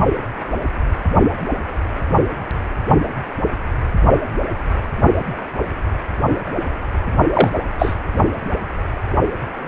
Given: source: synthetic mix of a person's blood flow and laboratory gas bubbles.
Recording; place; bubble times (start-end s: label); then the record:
Doppler ultrasound of blood flow; precordium
7.33-7.50 s: bubbles
7.79-7.95 s: bubbles
From the record:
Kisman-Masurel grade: 223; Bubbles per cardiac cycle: several, 3 to 8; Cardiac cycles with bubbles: 10 to 50%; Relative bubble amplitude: loud (0.450 to 0.775); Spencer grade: 2 (many but less than half of the cardiac periods contain bubble signals, singularly or in groups); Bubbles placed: only in the low amplitude regions of the cardiac cycle